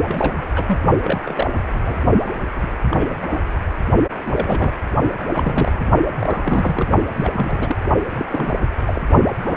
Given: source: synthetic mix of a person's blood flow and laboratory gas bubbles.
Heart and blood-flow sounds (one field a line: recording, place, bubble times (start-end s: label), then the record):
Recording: Doppler ultrasound of blood flow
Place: precordium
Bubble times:
0.08-0.78 s: bubbles
1.03-1.47 s: bubbles
1.72-2.01 s: bubbles
2.27-2.30 s: bubbles
2.56-2.67 s: bubbles
2.91-3.16 s: bubbles
3.22-3.27 s: bubbles
3.31-3.39 s: bubbles
4.14-4.72 s: bubbles
5.17-5.89 s: bubbles
6.11-6.88 s: bubbles
7.15-7.31 s: bubbles
7.33-7.77 s: bubbles
8.09-8.25 s: bubbles
8.32-8.54 s: bubbles
8.87-9.02 s: bubbles
9.44-9.56 s: bubbles
From the record:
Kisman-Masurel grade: 242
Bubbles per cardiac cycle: several, 3 to 8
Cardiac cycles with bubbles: 100%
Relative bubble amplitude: moderate (0.250 to 0.450)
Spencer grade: 3 (all of the cardiac periods contain showers or single bubble signals, but not dominating or overriding the cardiac motion signals)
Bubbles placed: only in the low amplitude regions of the cardiac cycle